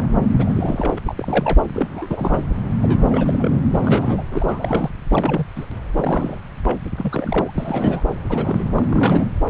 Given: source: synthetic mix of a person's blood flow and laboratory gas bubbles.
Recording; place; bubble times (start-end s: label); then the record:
Doppler ultrasound of blood flow; subclavian vein
0.00-0.06 s: bubbles
0.38-0.98 s: bubbles
1.05-1.14 s: bubbles
1.17-1.62 s: bubbles
1.74-2.45 s: bubbles
2.82-3.60 s: bubbles
3.71-4.25 s: bubbles
4.31-4.90 s: bubbles
5.09-5.47 s: bubbles
5.55-5.65 s: bubbles
5.95-6.40 s: bubbles
6.64-6.79 s: bubbles
6.96-7.54 s: bubbles
7.57-8.02 s: bubbles
8.29-8.65 s: bubbles
8.75-9.25 s: bubbles
From the record:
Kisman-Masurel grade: 342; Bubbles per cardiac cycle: rolling drumbeat, 9 or more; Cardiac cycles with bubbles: 100%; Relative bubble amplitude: moderate (0.250 to 0.450); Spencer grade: 3 (all of the cardiac periods contain showers or single bubble signals, but not dominating or overriding the cardiac motion signals); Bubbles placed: anywhere in the cardiac cycle